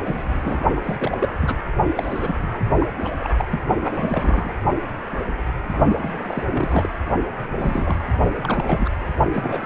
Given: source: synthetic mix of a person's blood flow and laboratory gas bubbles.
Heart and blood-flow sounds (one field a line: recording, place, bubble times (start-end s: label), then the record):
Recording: Doppler ultrasound of blood flow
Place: precordium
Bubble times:
0.00-0.60 s: bubbles
0.76-0.80 s: bubbles
0.83-1.29 s: bubbles
1.42-1.55 s: bubbles
1.96-2.35 s: bubbles
2.42-2.48 s: bubbles
2.79-2.87 s: bubbles
3.00-3.31 s: bubbles
3.37-3.60 s: bubbles
3.80-4.53 s: bubbles
6.01-6.44 s: bubbles
6.47-6.89 s: bubbles
7.41-7.95 s: bubbles
8.37-8.89 s: bubbles
9.31-9.65 s: bubbles
From the record:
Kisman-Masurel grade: 332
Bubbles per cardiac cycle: rolling drumbeat, 9 or more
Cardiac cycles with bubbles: 50 to 99%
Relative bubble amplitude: moderate (0.250 to 0.450)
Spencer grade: 3 (all of the cardiac periods contain showers or single bubble signals, but not dominating or overriding the cardiac motion signals)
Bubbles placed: only in the low amplitude regions of the cardiac cycle